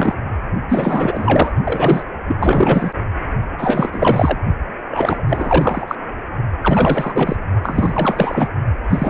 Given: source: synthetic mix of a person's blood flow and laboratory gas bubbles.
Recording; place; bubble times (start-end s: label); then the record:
Doppler ultrasound of blood flow; precordium
0.00-0.15 s: bubbles
0.69-1.52 s: bubbles
1.64-2.05 s: bubbles
2.27-2.35 s: bubbles
2.40-2.92 s: bubbles
3.58-4.38 s: bubbles
4.88-5.24 s: bubbles
5.28-5.95 s: bubbles
6.62-7.37 s: bubbles
7.62-8.48 s: bubbles
8.89-9.10 s: bubbles
From the record:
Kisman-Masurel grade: 444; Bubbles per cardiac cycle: continuous sound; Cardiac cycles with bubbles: 100%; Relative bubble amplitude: maximal (0.775 to 0.999); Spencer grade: 4 (maximum detectable bubble signal sounding continuously throughout systole and diastole of every cardiac period, and overriding the amplitude of the normal cardiac signals); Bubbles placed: only in the low amplitude regions of the cardiac cycle